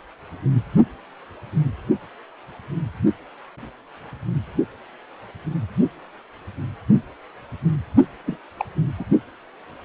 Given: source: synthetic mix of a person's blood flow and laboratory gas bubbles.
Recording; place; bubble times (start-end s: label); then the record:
Doppler ultrasound of blood flow; precordium
8.25-8.38 s: bubbles
8.58-8.65 s: bubbles
8.97-9.04 s: bubbles
From the record:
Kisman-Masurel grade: 211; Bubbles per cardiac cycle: several, 3 to 8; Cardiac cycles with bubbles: 1 to 10%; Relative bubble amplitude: barely perceptible (0.100 to 0.250); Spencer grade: 1 (occasional bubble signal discernible with the cardiac motion signal, with majority of cardiac periods free of bubbles); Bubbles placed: anywhere in the cardiac cycle